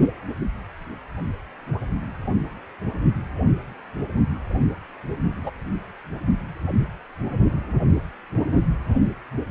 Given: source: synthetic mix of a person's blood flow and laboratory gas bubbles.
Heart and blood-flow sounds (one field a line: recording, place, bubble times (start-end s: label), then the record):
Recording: Doppler ultrasound of blood flow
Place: precordium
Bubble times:
5.43-5.51 s: bubbles
From the record:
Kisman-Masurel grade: 112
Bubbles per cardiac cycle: 1 to 2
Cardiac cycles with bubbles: 1 to 10%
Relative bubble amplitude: moderate (0.250 to 0.450)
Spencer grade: 1 (occasional bubble signal discernible with the cardiac motion signal, with majority of cardiac periods free of bubbles)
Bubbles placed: only in the low amplitude regions of the cardiac cycle